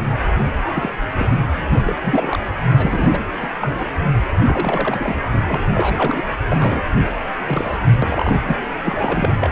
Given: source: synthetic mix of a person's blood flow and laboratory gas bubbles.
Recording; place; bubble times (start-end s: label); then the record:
Doppler ultrasound of blood flow; precordium
0.68-0.90 s: bubbles
1.19-1.38 s: bubbles
1.85-1.95 s: bubbles
2.03-2.39 s: bubbles
2.77-3.23 s: bubbles
3.42-3.47 s: bubbles
3.60-3.91 s: bubbles
4.46-5.14 s: bubbles
5.33-5.42 s: bubbles
5.46-5.60 s: bubbles
5.75-6.21 s: bubbles
6.48-6.81 s: bubbles
7.46-7.78 s: bubbles
8.02-8.42 s: bubbles
8.46-8.57 s: bubbles
8.85-9.32 s: bubbles
9.42-9.49 s: bubbles
From the record:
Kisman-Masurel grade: 242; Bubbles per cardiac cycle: several, 3 to 8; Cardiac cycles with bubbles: 100%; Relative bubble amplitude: moderate (0.250 to 0.450); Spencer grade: 3 (all of the cardiac periods contain showers or single bubble signals, but not dominating or overriding the cardiac motion signals); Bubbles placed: anywhere in the cardiac cycle